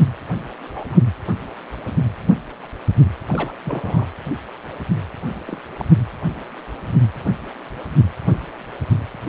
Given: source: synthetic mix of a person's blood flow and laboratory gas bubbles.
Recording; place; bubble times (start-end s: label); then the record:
Doppler ultrasound of blood flow; precordium
0.67-0.97 s: bubbles
3.27-3.54 s: bubbles
3.64-4.06 s: bubbles
5.47-5.59 s: bubbles
5.78-5.85 s: bubbles
From the record:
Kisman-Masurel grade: 122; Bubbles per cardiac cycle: 1 to 2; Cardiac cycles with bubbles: 10 to 50%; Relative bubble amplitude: moderate (0.250 to 0.450); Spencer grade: 2 (many but less than half of the cardiac periods contain bubble signals, singularly or in groups); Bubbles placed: anywhere in the cardiac cycle